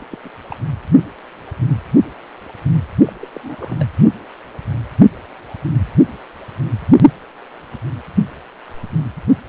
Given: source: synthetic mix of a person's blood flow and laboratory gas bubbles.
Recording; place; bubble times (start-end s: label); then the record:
Doppler ultrasound of blood flow; precordium
0.10-0.18 s: bubbles
0.24-0.29 s: bubbles
0.50-0.56 s: bubbles
3.07-3.12 s: bubbles
3.21-3.29 s: bubbles
3.33-3.40 s: bubbles
3.43-3.88 s: bubbles
From the record:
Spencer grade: 2 (many but less than half of the cardiac periods contain bubble signals, singularly or in groups); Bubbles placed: only in the low amplitude regions of the cardiac cycle